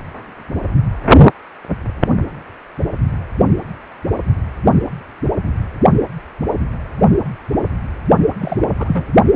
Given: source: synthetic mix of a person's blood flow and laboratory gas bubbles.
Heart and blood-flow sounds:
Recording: Doppler ultrasound of blood flow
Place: precordium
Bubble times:
8.39-8.70 s: bubbles
8.77-9.04 s: bubbles
From the record:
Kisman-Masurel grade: 211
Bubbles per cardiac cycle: several, 3 to 8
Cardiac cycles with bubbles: 1 to 10%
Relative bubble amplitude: barely perceptible (0.100 to 0.250)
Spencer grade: 1 (occasional bubble signal discernible with the cardiac motion signal, with majority of cardiac periods free of bubbles)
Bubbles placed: only in the low amplitude regions of the cardiac cycle

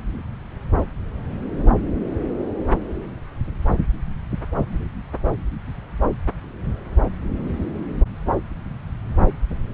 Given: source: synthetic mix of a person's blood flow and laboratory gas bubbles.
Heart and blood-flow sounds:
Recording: Doppler ultrasound of blood flow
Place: subclavian vein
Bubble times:
no bubbles
From the record:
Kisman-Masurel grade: 000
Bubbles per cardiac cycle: 0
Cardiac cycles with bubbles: 0%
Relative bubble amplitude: no bubbles discernible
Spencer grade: 0 (complete lack of bubble signals)

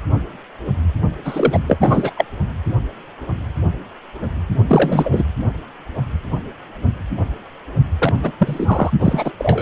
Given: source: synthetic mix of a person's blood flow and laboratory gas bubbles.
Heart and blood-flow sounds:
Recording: Doppler ultrasound of blood flow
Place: precordium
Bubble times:
1.24-1.60 s: bubbles
1.67-1.77 s: bubbles
1.80-2.11 s: bubbles
2.17-2.25 s: bubbles
4.68-5.24 s: bubbles
7.99-8.13 s: bubbles
8.23-8.31 s: bubbles
8.38-8.91 s: bubbles
9.00-9.33 s: bubbles
9.38-9.62 s: bubbles
From the record:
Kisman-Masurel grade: 223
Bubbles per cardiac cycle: several, 3 to 8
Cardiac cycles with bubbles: 10 to 50%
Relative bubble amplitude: loud (0.450 to 0.775)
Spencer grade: 2 (many but less than half of the cardiac periods contain bubble signals, singularly or in groups)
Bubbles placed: only in the low amplitude regions of the cardiac cycle

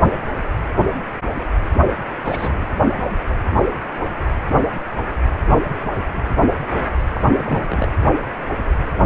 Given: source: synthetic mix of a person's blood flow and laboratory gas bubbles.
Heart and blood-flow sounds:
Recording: Doppler ultrasound of blood flow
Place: precordium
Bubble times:
2.22-2.66 s: bubbles
7.09-7.21 s: bubbles
7.34-7.89 s: bubbles
From the record:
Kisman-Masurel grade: 221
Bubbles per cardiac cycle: several, 3 to 8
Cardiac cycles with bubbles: 10 to 50%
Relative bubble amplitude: barely perceptible (0.100 to 0.250)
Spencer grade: 2 (many but less than half of the cardiac periods contain bubble signals, singularly or in groups)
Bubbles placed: anywhere in the cardiac cycle

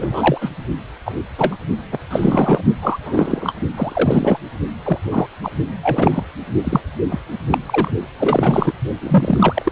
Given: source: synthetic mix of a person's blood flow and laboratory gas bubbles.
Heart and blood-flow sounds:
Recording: Doppler ultrasound of blood flow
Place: precordium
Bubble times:
0.00-0.38 s: bubbles
0.41-0.51 s: bubbles
1.05-1.14 s: bubbles
1.38-1.56 s: bubbles
1.91-1.99 s: bubbles
2.10-2.61 s: bubbles
2.81-2.98 s: bubbles
3.03-3.54 s: bubbles
3.77-4.38 s: bubbles
4.84-4.98 s: bubbles
5.11-5.27 s: bubbles
5.43-5.51 s: bubbles
5.82-6.23 s: bubbles
6.63-6.81 s: bubbles
7.09-7.20 s: bubbles
7.51-7.58 s: bubbles
7.66-7.91 s: bubbles
8.20-8.73 s: bubbles
9.00-9.72 s: bubbles
From the record:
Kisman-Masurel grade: 243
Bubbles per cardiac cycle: several, 3 to 8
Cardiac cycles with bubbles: 100%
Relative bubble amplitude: loud (0.450 to 0.775)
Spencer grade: 3 (all of the cardiac periods contain showers or single bubble signals, but not dominating or overriding the cardiac motion signals)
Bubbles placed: only in the low amplitude regions of the cardiac cycle

